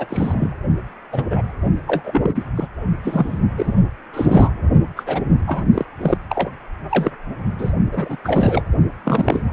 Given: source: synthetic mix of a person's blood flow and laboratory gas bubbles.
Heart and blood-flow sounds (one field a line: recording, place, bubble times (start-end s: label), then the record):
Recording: Doppler ultrasound of blood flow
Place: precordium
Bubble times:
0.00-0.54 s: bubbles
1.12-1.23 s: bubbles
1.30-1.42 s: bubbles
1.87-2.21 s: bubbles
2.23-2.46 s: bubbles
2.55-2.67 s: bubbles
3.02-3.42 s: bubbles
3.56-3.73 s: bubbles
4.13-4.50 s: bubbles
4.96-5.03 s: bubbles
5.07-5.21 s: bubbles
5.46-5.64 s: bubbles
5.72-5.85 s: bubbles
6.01-6.17 s: bubbles
6.29-6.51 s: bubbles
6.89-7.12 s: bubbles
7.58-7.72 s: bubbles
7.92-8.16 s: bubbles
8.24-8.62 s: bubbles
9.04-9.45 s: bubbles
From the record:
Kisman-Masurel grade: 242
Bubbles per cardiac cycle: several, 3 to 8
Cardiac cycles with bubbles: 100%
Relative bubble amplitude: moderate (0.250 to 0.450)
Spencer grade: 3 (all of the cardiac periods contain showers or single bubble signals, but not dominating or overriding the cardiac motion signals)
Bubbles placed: only in the low amplitude regions of the cardiac cycle